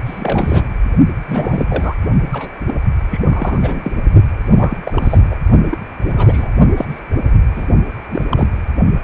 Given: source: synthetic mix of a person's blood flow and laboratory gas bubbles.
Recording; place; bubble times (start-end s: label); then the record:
Doppler ultrasound of blood flow; precordium
0.05-0.81 s: bubbles
1.28-1.66 s: bubbles
1.69-1.94 s: bubbles
2.32-2.49 s: bubbles
2.66-2.75 s: bubbles
3.10-3.21 s: bubbles
3.26-4.03 s: bubbles
4.55-4.78 s: bubbles
4.85-5.18 s: bubbles
5.30-5.36 s: bubbles
5.70-5.78 s: bubbles
6.06-6.52 s: bubbles
6.76-6.85 s: bubbles
6.90-7.00 s: bubbles
7.23-7.30 s: bubbles
7.55-7.66 s: bubbles
8.11-8.25 s: bubbles
8.29-8.47 s: bubbles
From the record:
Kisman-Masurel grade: 342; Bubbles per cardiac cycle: rolling drumbeat, 9 or more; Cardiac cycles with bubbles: 100%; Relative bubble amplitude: moderate (0.250 to 0.450); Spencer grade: 3 (all of the cardiac periods contain showers or single bubble signals, but not dominating or overriding the cardiac motion signals); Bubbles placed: only in the low amplitude regions of the cardiac cycle